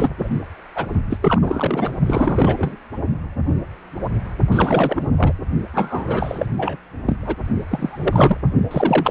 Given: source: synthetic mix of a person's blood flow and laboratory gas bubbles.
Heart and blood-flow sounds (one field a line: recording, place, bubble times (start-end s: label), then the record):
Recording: Doppler ultrasound of blood flow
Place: precordium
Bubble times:
0.00-0.10 s: bubbles
0.19-0.29 s: bubbles
0.75-0.86 s: bubbles
1.09-1.18 s: bubbles
1.22-1.95 s: bubbles
2.06-2.77 s: bubbles
4.51-5.06 s: bubbles
5.17-5.33 s: bubbles
5.74-6.46 s: bubbles
6.57-6.76 s: bubbles
7.06-7.17 s: bubbles
7.21-7.35 s: bubbles
7.68-8.38 s: bubbles
8.71-9.11 s: bubbles
From the record:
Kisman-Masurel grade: 333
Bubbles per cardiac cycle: rolling drumbeat, 9 or more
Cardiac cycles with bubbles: 50 to 99%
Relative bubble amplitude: loud (0.450 to 0.775)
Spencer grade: 3 (all of the cardiac periods contain showers or single bubble signals, but not dominating or overriding the cardiac motion signals)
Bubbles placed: only in the low amplitude regions of the cardiac cycle